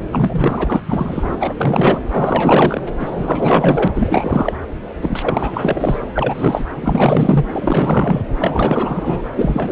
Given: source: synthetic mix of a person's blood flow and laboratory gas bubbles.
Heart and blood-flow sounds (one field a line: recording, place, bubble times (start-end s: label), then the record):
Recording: Doppler ultrasound of blood flow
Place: subclavian vein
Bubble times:
0.11-0.80 s: bubbles
0.88-1.54 s: bubbles
1.60-2.02 s: bubbles
2.11-2.82 s: bubbles
2.99-3.88 s: bubbles
3.94-4.54 s: bubbles
5.02-5.99 s: bubbles
6.16-6.65 s: bubbles
6.75-7.46 s: bubbles
7.52-8.22 s: bubbles
8.39-9.22 s: bubbles
9.36-9.72 s: bubbles
From the record:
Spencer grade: 4 (maximum detectable bubble signal sounding continuously throughout systole and diastole of every cardiac period, and overriding the amplitude of the normal cardiac signals)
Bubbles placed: anywhere in the cardiac cycle